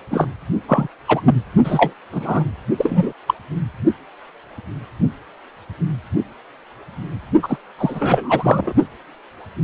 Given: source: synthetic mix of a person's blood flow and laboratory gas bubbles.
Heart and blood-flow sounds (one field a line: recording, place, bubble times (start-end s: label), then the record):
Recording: Doppler ultrasound of blood flow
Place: precordium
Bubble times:
0.10-0.27 s: bubbles
0.68-0.88 s: bubbles
1.08-1.21 s: bubbles
1.25-1.35 s: bubbles
1.64-1.93 s: bubbles
2.12-2.43 s: bubbles
2.77-3.12 s: bubbles
3.27-3.34 s: bubbles
7.42-7.58 s: bubbles
7.78-8.73 s: bubbles
From the record:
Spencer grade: 2 (many but less than half of the cardiac periods contain bubble signals, singularly or in groups)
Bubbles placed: only in the low amplitude regions of the cardiac cycle